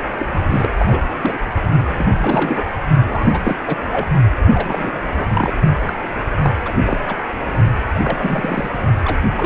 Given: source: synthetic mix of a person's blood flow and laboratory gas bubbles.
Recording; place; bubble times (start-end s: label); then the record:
Doppler ultrasound of blood flow; precordium
0.03-0.12 s: bubbles
0.17-0.26 s: bubbles
0.33-0.38 s: bubbles
0.50-0.70 s: bubbles
0.79-1.03 s: bubbles
1.22-1.37 s: bubbles
1.88-2.64 s: bubbles
3.09-3.56 s: bubbles
3.66-3.77 s: bubbles
3.90-4.14 s: bubbles
4.54-5.29 s: bubbles
5.34-5.54 s: bubbles
5.87-5.95 s: bubbles
6.42-6.53 s: bubbles
6.65-6.73 s: bubbles
6.85-6.98 s: bubbles
7.08-7.16 s: bubbles
7.95-8.01 s: bubbles
8.04-8.70 s: bubbles
9.05-9.28 s: bubbles
9.36-9.46 s: bubbles
From the record:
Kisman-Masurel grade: 342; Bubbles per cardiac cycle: rolling drumbeat, 9 or more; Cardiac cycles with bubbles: 100%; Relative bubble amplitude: moderate (0.250 to 0.450); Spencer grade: 3 (all of the cardiac periods contain showers or single bubble signals, but not dominating or overriding the cardiac motion signals); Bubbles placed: only in the low amplitude regions of the cardiac cycle